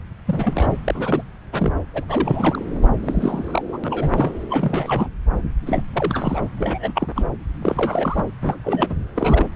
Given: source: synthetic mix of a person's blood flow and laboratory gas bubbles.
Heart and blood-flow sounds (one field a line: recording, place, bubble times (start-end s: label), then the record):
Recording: Doppler ultrasound of blood flow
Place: subclavian vein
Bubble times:
0.27-0.72 s: bubbles
0.85-1.23 s: bubbles
1.52-1.73 s: bubbles
1.93-2.06 s: bubbles
2.08-2.64 s: bubbles
2.82-2.87 s: bubbles
3.02-3.78 s: bubbles
3.84-4.32 s: bubbles
4.50-5.07 s: bubbles
5.66-5.83 s: bubbles
5.92-6.42 s: bubbles
6.58-7.25 s: bubbles
7.61-8.24 s: bubbles
8.42-8.58 s: bubbles
8.64-8.95 s: bubbles
9.16-9.50 s: bubbles
From the record:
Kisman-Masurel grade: 342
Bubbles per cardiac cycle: rolling drumbeat, 9 or more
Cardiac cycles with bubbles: 100%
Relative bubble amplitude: moderate (0.250 to 0.450)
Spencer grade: 3 (all of the cardiac periods contain showers or single bubble signals, but not dominating or overriding the cardiac motion signals)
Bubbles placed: anywhere in the cardiac cycle